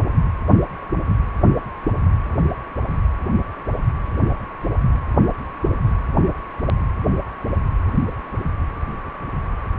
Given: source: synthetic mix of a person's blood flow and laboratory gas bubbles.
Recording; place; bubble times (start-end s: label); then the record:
Doppler ultrasound of blood flow; precordium
no bubbles
From the record:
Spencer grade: 0 (complete lack of bubble signals)